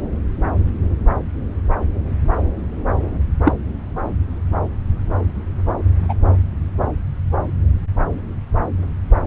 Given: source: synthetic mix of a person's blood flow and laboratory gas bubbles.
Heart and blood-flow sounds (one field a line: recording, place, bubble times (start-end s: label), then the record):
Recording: Doppler ultrasound of blood flow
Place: subclavian vein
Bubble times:
3.44-3.53 s: bubbles
6.08-6.14 s: bubbles
From the record:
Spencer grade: 2 (many but less than half of the cardiac periods contain bubble signals, singularly or in groups)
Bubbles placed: anywhere in the cardiac cycle